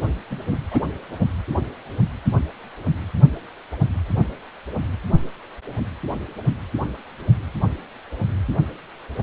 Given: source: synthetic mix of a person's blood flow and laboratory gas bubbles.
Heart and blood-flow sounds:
Doppler ultrasound of blood flow; precordium
0.01-0.10 s: bubbles
0.29-0.45 s: bubbles
0.50-0.58 s: bubbles
0.71-0.79 s: bubbles
From the record:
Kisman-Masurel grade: 211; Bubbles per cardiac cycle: several, 3 to 8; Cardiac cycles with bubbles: 1 to 10%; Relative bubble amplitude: barely perceptible (0.100 to 0.250); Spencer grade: 1 (occasional bubble signal discernible with the cardiac motion signal, with majority of cardiac periods free of bubbles); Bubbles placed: only in the low amplitude regions of the cardiac cycle

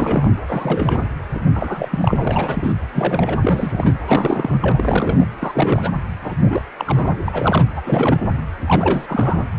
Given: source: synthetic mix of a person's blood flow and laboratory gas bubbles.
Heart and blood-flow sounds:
Doppler ultrasound of blood flow; precordium
0.00-0.31 s: bubbles
0.48-1.05 s: bubbles
1.34-1.39 s: bubbles
1.53-1.88 s: bubbles
1.91-2.73 s: bubbles
2.92-3.38 s: bubbles
3.41-3.93 s: bubbles
4.07-4.58 s: bubbles
4.62-5.26 s: bubbles
5.41-5.92 s: bubbles
6.21-6.34 s: bubbles
6.41-6.62 s: bubbles
6.79-7.18 s: bubbles
7.28-7.66 s: bubbles
7.76-7.81 s: bubbles
7.85-8.18 s: bubbles
8.66-9.44 s: bubbles
From the record:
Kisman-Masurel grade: 342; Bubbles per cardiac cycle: rolling drumbeat, 9 or more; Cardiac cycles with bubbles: 100%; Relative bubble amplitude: moderate (0.250 to 0.450); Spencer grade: 3 (all of the cardiac periods contain showers or single bubble signals, but not dominating or overriding the cardiac motion signals); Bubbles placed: anywhere in the cardiac cycle

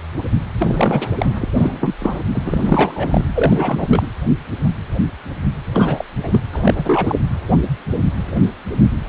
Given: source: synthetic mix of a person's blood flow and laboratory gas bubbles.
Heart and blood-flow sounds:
Doppler ultrasound of blood flow; precordium
0.59-1.35 s: bubbles
1.40-1.49 s: bubbles
1.57-1.95 s: bubbles
1.99-2.22 s: bubbles
2.34-3.25 s: bubbles
3.36-4.03 s: bubbles
5.73-6.04 s: bubbles
6.23-6.43 s: bubbles
6.53-7.21 s: bubbles
From the record:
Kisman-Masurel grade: 332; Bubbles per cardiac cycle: rolling drumbeat, 9 or more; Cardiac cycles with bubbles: 50 to 99%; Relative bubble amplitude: moderate (0.250 to 0.450); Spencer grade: 3 (all of the cardiac periods contain showers or single bubble signals, but not dominating or overriding the cardiac motion signals); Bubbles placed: anywhere in the cardiac cycle

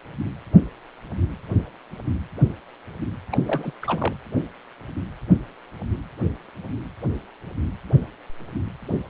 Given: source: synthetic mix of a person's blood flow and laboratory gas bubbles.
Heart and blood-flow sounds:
Doppler ultrasound of blood flow; precordium
3.31-3.38 s: bubbles
3.42-3.72 s: bubbles
3.82-4.13 s: bubbles
From the record:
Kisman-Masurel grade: 211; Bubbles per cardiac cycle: several, 3 to 8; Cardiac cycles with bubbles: 1 to 10%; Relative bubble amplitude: barely perceptible (0.100 to 0.250); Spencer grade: 1 (occasional bubble signal discernible with the cardiac motion signal, with majority of cardiac periods free of bubbles); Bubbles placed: anywhere in the cardiac cycle

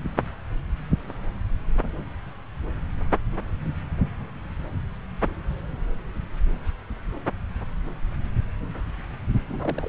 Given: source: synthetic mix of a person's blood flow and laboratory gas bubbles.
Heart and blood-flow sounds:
Doppler ultrasound of blood flow; subclavian vein
9.49-9.88 s: bubbles
From the record:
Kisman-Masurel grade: 211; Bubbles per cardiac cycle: several, 3 to 8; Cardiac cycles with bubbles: 1 to 10%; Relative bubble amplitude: barely perceptible (0.100 to 0.250); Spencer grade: 1 (occasional bubble signal discernible with the cardiac motion signal, with majority of cardiac periods free of bubbles); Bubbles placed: anywhere in the cardiac cycle

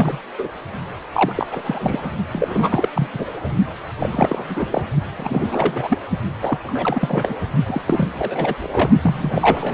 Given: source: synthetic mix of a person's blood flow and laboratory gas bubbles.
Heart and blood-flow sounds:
Doppler ultrasound of blood flow; precordium
0.00-0.19 s: bubbles
0.38-0.49 s: bubbles
1.12-1.33 s: bubbles
1.35-1.48 s: bubbles
1.52-2.10 s: bubbles
2.33-2.89 s: bubbles
2.94-3.08 s: bubbles
3.13-3.26 s: bubbles
3.99-4.45 s: bubbles
4.48-4.66 s: bubbles
4.71-4.82 s: bubbles
5.15-5.98 s: bubbles
6.42-6.58 s: bubbles
6.62-7.35 s: bubbles
7.65-7.81 s: bubbles
7.87-8.08 s: bubbles
8.18-8.54 s: bubbles
8.62-8.69 s: bubbles
8.71-8.89 s: bubbles
9.03-9.74 s: bubbles
From the record:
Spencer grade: 3 (all of the cardiac periods contain showers or single bubble signals, but not dominating or overriding the cardiac motion signals); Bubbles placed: only in the low amplitude regions of the cardiac cycle

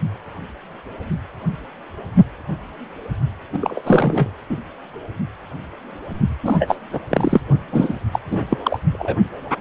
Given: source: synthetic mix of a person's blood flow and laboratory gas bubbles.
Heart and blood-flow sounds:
Doppler ultrasound of blood flow; precordium
3.53-3.82 s: bubbles
3.85-4.30 s: bubbles
4.50-4.57 s: bubbles
6.42-6.75 s: bubbles
6.92-7.00 s: bubbles
7.10-7.41 s: bubbles
7.71-7.95 s: bubbles
8.12-8.19 s: bubbles
8.27-8.46 s: bubbles
8.50-8.58 s: bubbles
8.64-8.79 s: bubbles
8.93-9.18 s: bubbles
From the record:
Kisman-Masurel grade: 333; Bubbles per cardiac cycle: rolling drumbeat, 9 or more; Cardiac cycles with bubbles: 50 to 99%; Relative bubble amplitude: loud (0.450 to 0.775); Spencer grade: 3 (all of the cardiac periods contain showers or single bubble signals, but not dominating or overriding the cardiac motion signals); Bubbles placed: only in the low amplitude regions of the cardiac cycle

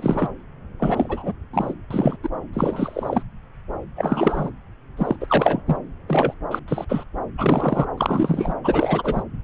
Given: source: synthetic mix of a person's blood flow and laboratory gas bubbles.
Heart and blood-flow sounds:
Doppler ultrasound of blood flow; subclavian vein
0.00-0.28 s: bubbles
0.79-1.32 s: bubbles
1.53-1.74 s: bubbles
1.91-2.17 s: bubbles
2.23-2.29 s: bubbles
2.53-3.23 s: bubbles
3.96-4.51 s: bubbles
4.97-5.16 s: bubbles
5.20-5.62 s: bubbles
5.66-5.77 s: bubbles
6.08-6.34 s: bubbles
6.51-6.60 s: bubbles
6.68-6.85 s: bubbles
6.89-7.05 s: bubbles
7.38-7.86 s: bubbles
7.98-8.55 s: bubbles
8.63-9.24 s: bubbles
From the record:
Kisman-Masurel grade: 333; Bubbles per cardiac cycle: rolling drumbeat, 9 or more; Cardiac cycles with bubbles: 50 to 99%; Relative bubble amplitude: loud (0.450 to 0.775); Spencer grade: 3 (all of the cardiac periods contain showers or single bubble signals, but not dominating or overriding the cardiac motion signals); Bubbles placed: anywhere in the cardiac cycle

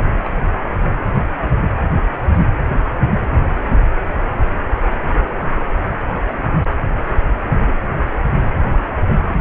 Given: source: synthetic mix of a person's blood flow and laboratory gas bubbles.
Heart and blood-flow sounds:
Doppler ultrasound of blood flow; precordium
0.23-0.30 s: bubbles
From the record:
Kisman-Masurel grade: 112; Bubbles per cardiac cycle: 1 to 2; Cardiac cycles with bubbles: 1 to 10%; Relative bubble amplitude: moderate (0.250 to 0.450); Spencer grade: 1 (occasional bubble signal discernible with the cardiac motion signal, with majority of cardiac periods free of bubbles); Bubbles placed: anywhere in the cardiac cycle

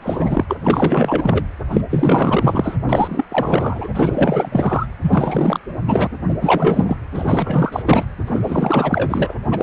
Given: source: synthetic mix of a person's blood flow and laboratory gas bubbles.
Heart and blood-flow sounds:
Doppler ultrasound of blood flow; precordium
0.00-0.46 s: bubbles
0.48-0.57 s: bubbles
0.62-1.45 s: bubbles
1.70-1.81 s: bubbles
1.90-2.76 s: bubbles
2.89-3.25 s: bubbles
3.29-3.89 s: bubbles
3.95-4.87 s: bubbles
5.02-5.59 s: bubbles
5.88-6.08 s: bubbles
6.28-6.34 s: bubbles
6.41-6.96 s: bubbles
7.12-7.83 s: bubbles
7.85-8.07 s: bubbles
8.26-9.36 s: bubbles
9.51-9.63 s: bubbles
From the record:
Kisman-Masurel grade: 444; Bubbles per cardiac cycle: continuous sound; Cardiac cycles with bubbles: 100%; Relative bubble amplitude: maximal (0.775 to 0.999); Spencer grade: 4 (maximum detectable bubble signal sounding continuously throughout systole and diastole of every cardiac period, and overriding the amplitude of the normal cardiac signals); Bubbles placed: anywhere in the cardiac cycle

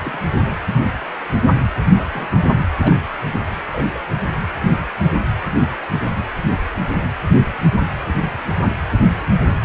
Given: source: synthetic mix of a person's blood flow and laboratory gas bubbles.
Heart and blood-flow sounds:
Doppler ultrasound of blood flow; precordium
0.04-0.24 s: bubbles
1.42-1.82 s: bubbles
1.85-2.28 s: bubbles
2.79-2.97 s: bubbles
3.72-4.00 s: bubbles
From the record:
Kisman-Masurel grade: 121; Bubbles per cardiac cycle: 1 to 2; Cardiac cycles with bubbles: 10 to 50%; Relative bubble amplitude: barely perceptible (0.100 to 0.250); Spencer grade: 2 (many but less than half of the cardiac periods contain bubble signals, singularly or in groups); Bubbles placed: anywhere in the cardiac cycle

